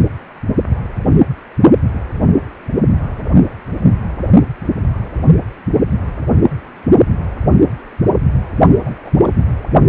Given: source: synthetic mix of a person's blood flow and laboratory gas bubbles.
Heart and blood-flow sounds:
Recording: Doppler ultrasound of blood flow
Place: precordium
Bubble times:
8.85-8.96 s: bubbles
9.04-9.12 s: bubbles
9.19-9.44 s: bubbles
From the record:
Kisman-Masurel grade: 221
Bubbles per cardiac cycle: several, 3 to 8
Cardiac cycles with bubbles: 10 to 50%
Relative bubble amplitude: barely perceptible (0.100 to 0.250)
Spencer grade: 2 (many but less than half of the cardiac periods contain bubble signals, singularly or in groups)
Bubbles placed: only in the low amplitude regions of the cardiac cycle

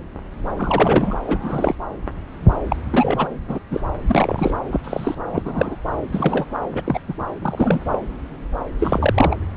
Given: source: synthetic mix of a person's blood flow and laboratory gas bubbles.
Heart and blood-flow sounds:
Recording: Doppler ultrasound of blood flow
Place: subclavian vein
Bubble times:
0.57-1.15 s: bubbles
1.26-1.75 s: bubbles
2.69-2.76 s: bubbles
2.92-3.29 s: bubbles
3.48-3.60 s: bubbles
3.71-3.81 s: bubbles
4.07-4.52 s: bubbles
4.71-4.79 s: bubbles
4.84-5.15 s: bubbles
5.32-5.77 s: bubbles
6.12-6.46 s: bubbles
6.72-6.81 s: bubbles
6.84-7.00 s: bubbles
7.08-7.14 s: bubbles
7.41-7.80 s: bubbles
7.88-7.99 s: bubbles
8.79-9.37 s: bubbles
From the record:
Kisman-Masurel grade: 232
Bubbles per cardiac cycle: several, 3 to 8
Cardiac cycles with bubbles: 50 to 99%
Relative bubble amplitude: moderate (0.250 to 0.450)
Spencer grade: 3 (all of the cardiac periods contain showers or single bubble signals, but not dominating or overriding the cardiac motion signals)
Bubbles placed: anywhere in the cardiac cycle

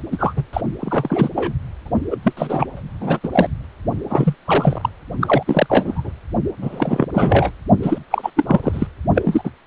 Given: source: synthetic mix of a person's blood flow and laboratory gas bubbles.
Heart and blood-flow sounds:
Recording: Doppler ultrasound of blood flow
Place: precordium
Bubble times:
0.11-0.33 s: bubbles
0.36-0.43 s: bubbles
0.53-0.61 s: bubbles
0.79-1.29 s: bubbles
1.35-1.53 s: bubbles
1.85-1.89 s: bubbles
2.10-2.17 s: bubbles
2.23-2.33 s: bubbles
2.37-2.67 s: bubbles
2.77-2.82 s: bubbles
3.00-3.19 s: bubbles
3.23-3.29 s: bubbles
3.32-3.48 s: bubbles
4.10-4.35 s: bubbles
4.46-4.89 s: bubbles
5.20-5.43 s: bubbles
5.46-5.66 s: bubbles
5.69-6.12 s: bubbles
6.62-7.06 s: bubbles
7.13-7.52 s: bubbles
7.82-7.99 s: bubbles
8.10-8.30 s: bubbles
8.36-8.44 s: bubbles
8.46-8.87 s: bubbles
9.14-9.42 s: bubbles
9.44-9.51 s: bubbles
From the record:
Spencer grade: 3 (all of the cardiac periods contain showers or single bubble signals, but not dominating or overriding the cardiac motion signals)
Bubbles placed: anywhere in the cardiac cycle

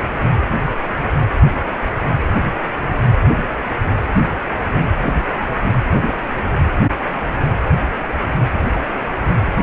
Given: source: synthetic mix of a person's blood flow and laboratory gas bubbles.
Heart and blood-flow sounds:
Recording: Doppler ultrasound of blood flow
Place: precordium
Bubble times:
4.01-4.06 s: bubbles
From the record:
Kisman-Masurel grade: 111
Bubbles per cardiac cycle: 1 to 2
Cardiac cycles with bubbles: 1 to 10%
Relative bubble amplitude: barely perceptible (0.100 to 0.250)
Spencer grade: 1 (occasional bubble signal discernible with the cardiac motion signal, with majority of cardiac periods free of bubbles)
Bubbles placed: anywhere in the cardiac cycle

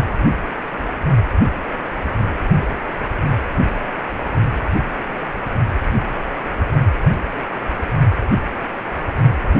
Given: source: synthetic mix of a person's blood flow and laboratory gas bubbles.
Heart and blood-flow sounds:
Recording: Doppler ultrasound of blood flow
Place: precordium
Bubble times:
2.58-2.73 s: bubbles
From the record:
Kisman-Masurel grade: 121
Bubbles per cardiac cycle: 1 to 2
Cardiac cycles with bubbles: 10 to 50%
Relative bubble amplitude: barely perceptible (0.100 to 0.250)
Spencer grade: 2 (many but less than half of the cardiac periods contain bubble signals, singularly or in groups)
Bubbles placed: anywhere in the cardiac cycle

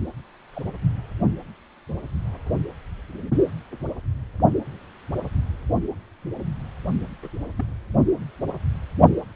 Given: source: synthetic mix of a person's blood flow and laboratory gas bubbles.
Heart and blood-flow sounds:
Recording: Doppler ultrasound of blood flow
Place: precordium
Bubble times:
0.53-0.62 s: bubbles
0.66-0.71 s: bubbles
5.83-5.88 s: bubbles
7.22-7.30 s: bubbles
7.55-7.66 s: bubbles
From the record:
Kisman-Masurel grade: 121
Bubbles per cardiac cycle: 1 to 2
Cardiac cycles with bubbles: 10 to 50%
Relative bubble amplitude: barely perceptible (0.100 to 0.250)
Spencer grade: 2 (many but less than half of the cardiac periods contain bubble signals, singularly or in groups)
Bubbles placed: only in the low amplitude regions of the cardiac cycle

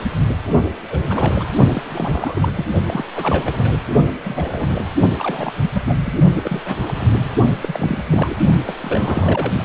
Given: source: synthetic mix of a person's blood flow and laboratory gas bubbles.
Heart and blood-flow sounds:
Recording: Doppler ultrasound of blood flow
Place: precordium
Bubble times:
0.00-0.05 s: bubbles
0.90-1.49 s: bubbles
1.69-1.83 s: bubbles
1.90-2.52 s: bubbles
2.54-2.74 s: bubbles
2.86-3.04 s: bubbles
3.15-3.77 s: bubbles
4.24-4.94 s: bubbles
5.18-5.50 s: bubbles
5.61-5.98 s: bubbles
6.05-6.14 s: bubbles
6.34-6.61 s: bubbles
6.66-6.75 s: bubbles
6.88-6.93 s: bubbles
6.98-7.30 s: bubbles
7.62-8.04 s: bubbles
8.10-8.35 s: bubbles
8.67-8.76 s: bubbles
8.83-9.65 s: bubbles
From the record:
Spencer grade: 3 (all of the cardiac periods contain showers or single bubble signals, but not dominating or overriding the cardiac motion signals)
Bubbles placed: only in the low amplitude regions of the cardiac cycle

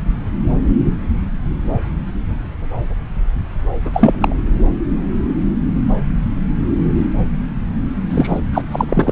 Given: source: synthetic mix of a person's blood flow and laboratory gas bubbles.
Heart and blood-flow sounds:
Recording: Doppler ultrasound of blood flow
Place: subclavian vein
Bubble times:
3.85-3.90 s: bubbles
3.93-4.36 s: bubbles
8.10-8.40 s: bubbles
8.53-8.62 s: bubbles
8.71-8.85 s: bubbles
8.89-9.11 s: bubbles
From the record:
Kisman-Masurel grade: 213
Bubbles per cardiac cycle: several, 3 to 8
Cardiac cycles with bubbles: 1 to 10%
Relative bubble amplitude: loud (0.450 to 0.775)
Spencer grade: 1 (occasional bubble signal discernible with the cardiac motion signal, with majority of cardiac periods free of bubbles)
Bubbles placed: anywhere in the cardiac cycle

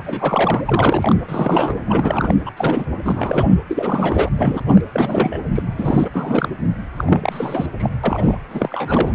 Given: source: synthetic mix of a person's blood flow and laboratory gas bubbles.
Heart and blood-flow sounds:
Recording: Doppler ultrasound of blood flow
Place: precordium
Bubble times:
0.04-0.61 s: bubbles
0.65-1.15 s: bubbles
1.29-1.78 s: bubbles
1.86-2.34 s: bubbles
2.46-2.50 s: bubbles
2.56-2.85 s: bubbles
3.04-3.57 s: bubbles
3.68-4.29 s: bubbles
4.37-4.62 s: bubbles
4.67-4.81 s: bubbles
4.92-5.40 s: bubbles
5.54-5.62 s: bubbles
5.77-6.09 s: bubbles
6.13-6.49 s: bubbles
6.96-7.04 s: bubbles
7.07-7.67 s: bubbles
7.78-7.90 s: bubbles
8.04-8.37 s: bubbles
8.50-9.15 s: bubbles
From the record:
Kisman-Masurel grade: 342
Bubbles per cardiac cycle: rolling drumbeat, 9 or more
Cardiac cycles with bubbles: 100%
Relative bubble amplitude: moderate (0.250 to 0.450)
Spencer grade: 3 (all of the cardiac periods contain showers or single bubble signals, but not dominating or overriding the cardiac motion signals)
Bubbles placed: anywhere in the cardiac cycle

